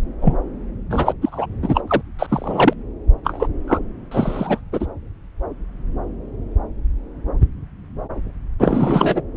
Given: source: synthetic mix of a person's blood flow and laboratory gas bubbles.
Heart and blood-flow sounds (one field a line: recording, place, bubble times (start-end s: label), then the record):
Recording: Doppler ultrasound of blood flow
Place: subclavian vein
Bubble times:
0.21-0.36 s: bubbles
0.90-1.13 s: bubbles
1.22-1.47 s: bubbles
1.62-1.81 s: bubbles
1.87-2.01 s: bubbles
2.18-2.74 s: bubbles
3.24-3.47 s: bubbles
3.67-3.79 s: bubbles
4.11-4.61 s: bubbles
4.72-4.87 s: bubbles
8.60-9.22 s: bubbles
From the record:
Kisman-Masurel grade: 333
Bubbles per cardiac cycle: rolling drumbeat, 9 or more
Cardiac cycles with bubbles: 50 to 99%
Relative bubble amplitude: loud (0.450 to 0.775)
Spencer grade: 3 (all of the cardiac periods contain showers or single bubble signals, but not dominating or overriding the cardiac motion signals)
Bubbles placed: anywhere in the cardiac cycle